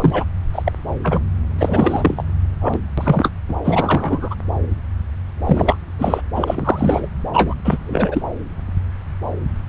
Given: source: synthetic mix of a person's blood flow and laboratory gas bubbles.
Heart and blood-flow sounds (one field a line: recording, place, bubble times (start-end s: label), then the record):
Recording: Doppler ultrasound of blood flow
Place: subclavian vein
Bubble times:
0.00-0.25 s: bubbles
0.52-0.72 s: bubbles
1.03-1.21 s: bubbles
1.58-2.23 s: bubbles
2.60-2.79 s: bubbles
2.98-3.31 s: bubbles
3.48-3.54 s: bubbles
3.64-4.35 s: bubbles
5.45-5.77 s: bubbles
5.98-6.21 s: bubbles
6.35-7.08 s: bubbles
7.33-7.54 s: bubbles
7.64-7.78 s: bubbles
7.83-8.22 s: bubbles
From the record:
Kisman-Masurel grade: 333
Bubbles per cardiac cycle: rolling drumbeat, 9 or more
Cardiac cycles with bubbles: 50 to 99%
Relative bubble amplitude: loud (0.450 to 0.775)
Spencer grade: 3 (all of the cardiac periods contain showers or single bubble signals, but not dominating or overriding the cardiac motion signals)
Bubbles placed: anywhere in the cardiac cycle